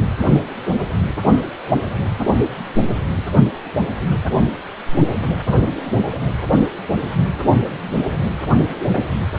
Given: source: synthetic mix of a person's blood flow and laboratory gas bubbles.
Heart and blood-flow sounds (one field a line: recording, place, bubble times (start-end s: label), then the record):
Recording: Doppler ultrasound of blood flow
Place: precordium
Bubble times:
3.17-3.23 s: bubbles
From the record:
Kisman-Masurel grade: 121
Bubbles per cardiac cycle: 1 to 2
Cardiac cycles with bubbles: 10 to 50%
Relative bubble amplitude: barely perceptible (0.100 to 0.250)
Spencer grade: 2 (many but less than half of the cardiac periods contain bubble signals, singularly or in groups)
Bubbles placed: only in the low amplitude regions of the cardiac cycle